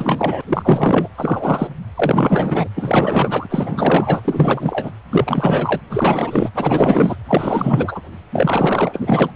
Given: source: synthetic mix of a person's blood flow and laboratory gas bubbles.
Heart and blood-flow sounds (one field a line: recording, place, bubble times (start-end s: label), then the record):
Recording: Doppler ultrasound of blood flow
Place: precordium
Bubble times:
0.00-0.42 s: bubbles
0.47-1.08 s: bubbles
1.17-1.70 s: bubbles
1.96-2.68 s: bubbles
2.75-3.46 s: bubbles
3.50-4.21 s: bubbles
4.24-4.92 s: bubbles
5.11-5.79 s: bubbles
5.90-6.50 s: bubbles
6.55-7.16 s: bubbles
7.27-8.02 s: bubbles
8.32-9.30 s: bubbles
From the record:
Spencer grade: 4 (maximum detectable bubble signal sounding continuously throughout systole and diastole of every cardiac period, and overriding the amplitude of the normal cardiac signals)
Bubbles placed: anywhere in the cardiac cycle